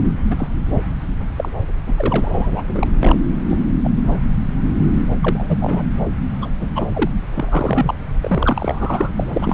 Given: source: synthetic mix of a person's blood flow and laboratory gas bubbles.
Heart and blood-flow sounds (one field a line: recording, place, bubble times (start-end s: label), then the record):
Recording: Doppler ultrasound of blood flow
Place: subclavian vein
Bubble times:
0.30-0.48 s: bubbles
1.36-1.48 s: bubbles
1.87-2.63 s: bubbles
2.67-2.86 s: bubbles
3.00-3.16 s: bubbles
3.48-3.57 s: bubbles
3.83-3.90 s: bubbles
4.03-4.18 s: bubbles
5.23-5.83 s: bubbles
6.42-6.48 s: bubbles
6.60-6.68 s: bubbles
6.76-6.87 s: bubbles
6.93-7.12 s: bubbles
7.34-7.97 s: bubbles
8.21-9.12 s: bubbles
9.16-9.25 s: bubbles
9.33-9.53 s: bubbles
From the record:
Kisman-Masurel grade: 242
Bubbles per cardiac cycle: several, 3 to 8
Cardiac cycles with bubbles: 100%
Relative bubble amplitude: moderate (0.250 to 0.450)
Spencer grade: 3 (all of the cardiac periods contain showers or single bubble signals, but not dominating or overriding the cardiac motion signals)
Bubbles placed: anywhere in the cardiac cycle